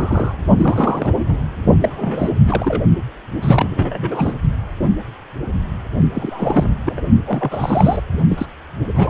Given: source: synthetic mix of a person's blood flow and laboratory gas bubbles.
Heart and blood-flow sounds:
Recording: Doppler ultrasound of blood flow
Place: precordium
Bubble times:
0.00-0.36 s: bubbles
0.57-1.12 s: bubbles
1.28-1.38 s: bubbles
1.80-2.31 s: bubbles
2.47-2.85 s: bubbles
3.42-4.35 s: bubbles
6.15-6.74 s: bubbles
6.86-7.00 s: bubbles
7.26-8.01 s: bubbles
8.10-8.18 s: bubbles
8.29-8.46 s: bubbles
8.95-9.10 s: bubbles
From the record:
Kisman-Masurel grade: 332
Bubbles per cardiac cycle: rolling drumbeat, 9 or more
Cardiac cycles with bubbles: 50 to 99%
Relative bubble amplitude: moderate (0.250 to 0.450)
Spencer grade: 3 (all of the cardiac periods contain showers or single bubble signals, but not dominating or overriding the cardiac motion signals)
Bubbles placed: only in the low amplitude regions of the cardiac cycle

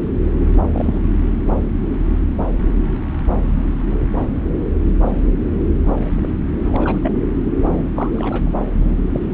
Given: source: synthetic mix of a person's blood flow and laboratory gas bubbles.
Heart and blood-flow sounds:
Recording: Doppler ultrasound of blood flow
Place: subclavian vein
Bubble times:
0.73-1.02 s: bubbles
6.16-6.39 s: bubbles
6.64-6.99 s: bubbles
7.02-7.16 s: bubbles
7.95-8.51 s: bubbles
8.80-9.04 s: bubbles
9.13-9.21 s: bubbles
9.31-9.34 s: bubbles
From the record:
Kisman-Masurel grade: 222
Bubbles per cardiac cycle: several, 3 to 8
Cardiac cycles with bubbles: 10 to 50%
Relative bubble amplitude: moderate (0.250 to 0.450)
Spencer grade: 2 (many but less than half of the cardiac periods contain bubble signals, singularly or in groups)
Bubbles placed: anywhere in the cardiac cycle

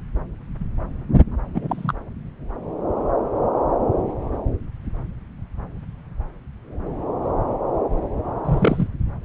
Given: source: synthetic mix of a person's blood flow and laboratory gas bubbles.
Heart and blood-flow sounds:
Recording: Doppler ultrasound of blood flow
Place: subclavian vein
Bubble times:
1.54-1.93 s: bubbles
8.45-8.88 s: bubbles
From the record:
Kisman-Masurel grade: 122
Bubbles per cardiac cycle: 1 to 2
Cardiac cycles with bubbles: 10 to 50%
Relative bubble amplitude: moderate (0.250 to 0.450)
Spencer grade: 2 (many but less than half of the cardiac periods contain bubble signals, singularly or in groups)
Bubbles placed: anywhere in the cardiac cycle

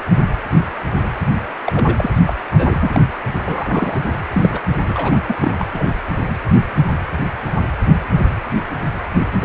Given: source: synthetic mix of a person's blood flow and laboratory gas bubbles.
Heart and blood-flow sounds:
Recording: Doppler ultrasound of blood flow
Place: precordium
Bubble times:
1.65-2.10 s: bubbles
2.27-2.33 s: bubbles
2.52-2.76 s: bubbles
2.80-3.00 s: bubbles
3.45-4.20 s: bubbles
4.32-4.60 s: bubbles
4.87-5.19 s: bubbles
5.28-5.38 s: bubbles
5.42-5.51 s: bubbles
5.59-5.65 s: bubbles
5.73-5.90 s: bubbles
From the record:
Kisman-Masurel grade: 332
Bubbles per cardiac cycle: rolling drumbeat, 9 or more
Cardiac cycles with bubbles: 50 to 99%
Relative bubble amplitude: moderate (0.250 to 0.450)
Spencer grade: 3 (all of the cardiac periods contain showers or single bubble signals, but not dominating or overriding the cardiac motion signals)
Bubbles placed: anywhere in the cardiac cycle

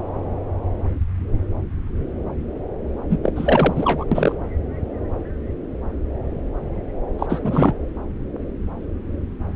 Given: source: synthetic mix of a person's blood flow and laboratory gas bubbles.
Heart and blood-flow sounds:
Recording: Doppler ultrasound of blood flow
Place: subclavian vein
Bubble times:
3.10-3.19 s: bubbles
3.23-3.33 s: bubbles
3.35-4.04 s: bubbles
4.12-4.36 s: bubbles
7.19-7.27 s: bubbles
7.29-7.41 s: bubbles
7.44-7.75 s: bubbles
From the record:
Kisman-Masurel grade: 222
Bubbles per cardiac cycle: several, 3 to 8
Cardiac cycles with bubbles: 10 to 50%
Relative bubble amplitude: moderate (0.250 to 0.450)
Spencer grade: 2 (many but less than half of the cardiac periods contain bubble signals, singularly or in groups)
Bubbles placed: anywhere in the cardiac cycle

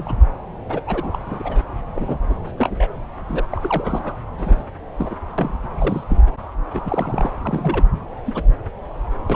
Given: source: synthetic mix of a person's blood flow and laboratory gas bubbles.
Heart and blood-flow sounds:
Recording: Doppler ultrasound of blood flow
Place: subclavian vein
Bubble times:
0.00-0.14 s: bubbles
0.69-0.81 s: bubbles
0.87-1.18 s: bubbles
1.26-1.63 s: bubbles
1.95-2.17 s: bubbles
2.29-2.34 s: bubbles
2.47-2.52 s: bubbles
2.57-2.88 s: bubbles
3.28-3.45 s: bubbles
3.50-4.15 s: bubbles
4.38-4.63 s: bubbles
4.97-5.16 s: bubbles
5.38-5.54 s: bubbles
5.78-6.04 s: bubbles
6.09-6.22 s: bubbles
6.73-6.82 s: bubbles
6.84-7.30 s: bubbles
7.42-7.83 s: bubbles
8.25-8.42 s: bubbles
9.29-9.35 s: bubbles
From the record:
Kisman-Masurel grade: 242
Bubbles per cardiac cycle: several, 3 to 8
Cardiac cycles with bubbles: 100%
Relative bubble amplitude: moderate (0.250 to 0.450)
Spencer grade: 3 (all of the cardiac periods contain showers or single bubble signals, but not dominating or overriding the cardiac motion signals)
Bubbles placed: anywhere in the cardiac cycle

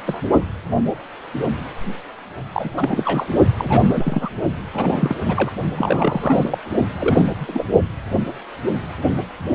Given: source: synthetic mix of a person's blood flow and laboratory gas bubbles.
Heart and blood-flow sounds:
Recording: Doppler ultrasound of blood flow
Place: precordium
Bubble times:
0.05-0.21 s: bubbles
2.52-2.70 s: bubbles
2.77-3.27 s: bubbles
3.57-4.29 s: bubbles
4.73-5.21 s: bubbles
5.24-5.51 s: bubbles
5.75-6.58 s: bubbles
6.99-7.33 s: bubbles
7.38-7.65 s: bubbles
From the record:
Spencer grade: 3 (all of the cardiac periods contain showers or single bubble signals, but not dominating or overriding the cardiac motion signals)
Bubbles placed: only in the low amplitude regions of the cardiac cycle

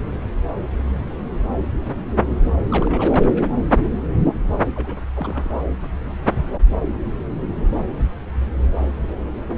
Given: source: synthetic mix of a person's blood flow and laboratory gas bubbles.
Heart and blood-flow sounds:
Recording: Doppler ultrasound of blood flow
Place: subclavian vein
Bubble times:
2.69-3.48 s: bubbles
4.75-4.97 s: bubbles
5.15-5.60 s: bubbles
From the record:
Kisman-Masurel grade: 221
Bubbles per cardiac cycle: several, 3 to 8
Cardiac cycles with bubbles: 10 to 50%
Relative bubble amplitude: barely perceptible (0.100 to 0.250)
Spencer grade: 2 (many but less than half of the cardiac periods contain bubble signals, singularly or in groups)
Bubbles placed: anywhere in the cardiac cycle

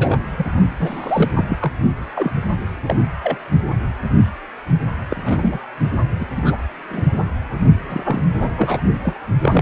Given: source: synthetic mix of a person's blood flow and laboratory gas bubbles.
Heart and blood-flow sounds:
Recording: Doppler ultrasound of blood flow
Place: precordium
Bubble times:
0.00-0.17 s: bubbles
0.38-0.46 s: bubbles
0.79-1.30 s: bubbles
1.35-1.44 s: bubbles
1.49-1.58 s: bubbles
1.61-1.72 s: bubbles
2.14-2.31 s: bubbles
2.86-2.96 s: bubbles
3.23-3.38 s: bubbles
5.10-5.59 s: bubbles
6.19-6.26 s: bubbles
6.35-6.57 s: bubbles
6.89-7.04 s: bubbles
7.89-8.24 s: bubbles
8.31-8.48 s: bubbles
8.57-8.81 s: bubbles
9.03-9.15 s: bubbles
9.41-9.61 s: bubbles
From the record:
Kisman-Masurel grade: 232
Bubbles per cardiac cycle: several, 3 to 8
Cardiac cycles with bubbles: 50 to 99%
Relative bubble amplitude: moderate (0.250 to 0.450)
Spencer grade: 3 (all of the cardiac periods contain showers or single bubble signals, but not dominating or overriding the cardiac motion signals)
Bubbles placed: only in the low amplitude regions of the cardiac cycle

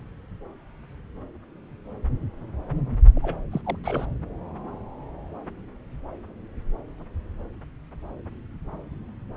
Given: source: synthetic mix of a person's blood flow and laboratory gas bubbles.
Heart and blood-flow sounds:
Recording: Doppler ultrasound of blood flow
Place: subclavian vein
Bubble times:
3.16-3.37 s: bubbles
3.52-3.62 s: bubbles
3.65-3.76 s: bubbles
3.83-4.05 s: bubbles
From the record:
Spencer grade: 1 (occasional bubble signal discernible with the cardiac motion signal, with majority of cardiac periods free of bubbles)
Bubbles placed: anywhere in the cardiac cycle

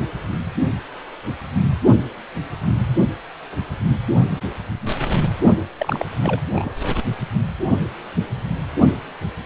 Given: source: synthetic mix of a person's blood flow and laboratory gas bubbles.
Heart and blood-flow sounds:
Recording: Doppler ultrasound of blood flow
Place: precordium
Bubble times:
5.78-6.03 s: bubbles
6.21-6.40 s: bubbles
6.54-6.89 s: bubbles
From the record:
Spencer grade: 1 (occasional bubble signal discernible with the cardiac motion signal, with majority of cardiac periods free of bubbles)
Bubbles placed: only in the low amplitude regions of the cardiac cycle

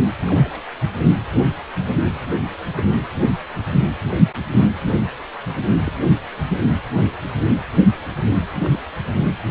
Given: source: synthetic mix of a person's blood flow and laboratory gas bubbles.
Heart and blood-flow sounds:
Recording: Doppler ultrasound of blood flow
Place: precordium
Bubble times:
0.27-0.60 s: bubbles
2.78-2.83 s: bubbles
2.91-2.95 s: bubbles
5.85-5.92 s: bubbles
8.64-8.79 s: bubbles
From the record:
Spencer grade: 2 (many but less than half of the cardiac periods contain bubble signals, singularly or in groups)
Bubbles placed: anywhere in the cardiac cycle

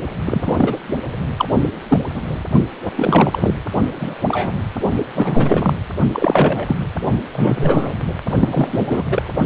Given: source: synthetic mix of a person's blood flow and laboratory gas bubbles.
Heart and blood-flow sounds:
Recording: Doppler ultrasound of blood flow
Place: precordium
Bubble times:
0.25-0.78 s: bubbles
1.36-1.45 s: bubbles
1.88-1.98 s: bubbles
2.14-2.21 s: bubbles
2.96-3.54 s: bubbles
4.00-4.15 s: bubbles
4.23-4.55 s: bubbles
5.15-5.78 s: bubbles
6.12-6.76 s: bubbles
7.32-7.94 s: bubbles
8.39-9.23 s: bubbles
From the record:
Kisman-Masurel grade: 243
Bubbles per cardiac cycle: several, 3 to 8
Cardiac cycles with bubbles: 100%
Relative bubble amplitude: loud (0.450 to 0.775)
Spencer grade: 3 (all of the cardiac periods contain showers or single bubble signals, but not dominating or overriding the cardiac motion signals)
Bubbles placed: only in the low amplitude regions of the cardiac cycle

